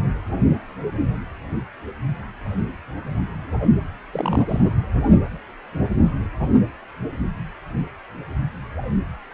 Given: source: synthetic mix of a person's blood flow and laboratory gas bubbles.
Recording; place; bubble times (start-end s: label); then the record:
Doppler ultrasound of blood flow; precordium
4.12-4.60 s: bubbles
4.63-4.71 s: bubbles
From the record:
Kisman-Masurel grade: 212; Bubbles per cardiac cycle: several, 3 to 8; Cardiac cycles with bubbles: 1 to 10%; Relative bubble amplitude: moderate (0.250 to 0.450); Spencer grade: 1 (occasional bubble signal discernible with the cardiac motion signal, with majority of cardiac periods free of bubbles); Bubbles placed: anywhere in the cardiac cycle